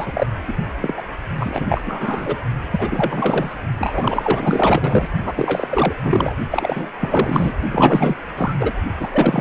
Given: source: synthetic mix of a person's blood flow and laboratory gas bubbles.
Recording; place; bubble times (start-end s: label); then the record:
Doppler ultrasound of blood flow; precordium
0.00-0.27 s: bubbles
0.47-0.54 s: bubbles
0.81-1.03 s: bubbles
1.40-1.83 s: bubbles
1.85-2.43 s: bubbles
2.71-3.54 s: bubbles
3.78-5.08 s: bubbles
5.24-5.94 s: bubbles
6.04-6.34 s: bubbles
6.50-6.91 s: bubbles
7.00-7.53 s: bubbles
7.71-8.16 s: bubbles
8.36-8.54 s: bubbles
8.58-8.72 s: bubbles
8.99-9.41 s: bubbles
From the record:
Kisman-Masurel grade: 444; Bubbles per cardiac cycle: continuous sound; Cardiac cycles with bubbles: 100%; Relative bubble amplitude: maximal (0.775 to 0.999); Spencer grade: 4 (maximum detectable bubble signal sounding continuously throughout systole and diastole of every cardiac period, and overriding the amplitude of the normal cardiac signals); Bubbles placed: only in the low amplitude regions of the cardiac cycle